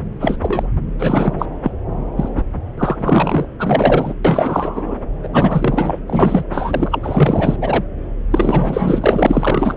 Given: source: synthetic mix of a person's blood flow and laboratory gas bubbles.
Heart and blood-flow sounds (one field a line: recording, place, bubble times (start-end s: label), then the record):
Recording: Doppler ultrasound of blood flow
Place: subclavian vein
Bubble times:
0.20-0.38 s: bubbles
0.41-0.68 s: bubbles
0.99-1.33 s: bubbles
1.39-1.46 s: bubbles
1.63-1.72 s: bubbles
2.16-2.29 s: bubbles
2.37-2.44 s: bubbles
2.77-2.96 s: bubbles
2.98-3.46 s: bubbles
3.59-4.14 s: bubbles
4.24-4.95 s: bubbles
5.23-5.28 s: bubbles
5.32-5.99 s: bubbles
6.06-6.44 s: bubbles
6.52-7.56 s: bubbles
7.60-7.84 s: bubbles
8.30-9.76 s: bubbles
From the record:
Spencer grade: 4 (maximum detectable bubble signal sounding continuously throughout systole and diastole of every cardiac period, and overriding the amplitude of the normal cardiac signals)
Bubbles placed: anywhere in the cardiac cycle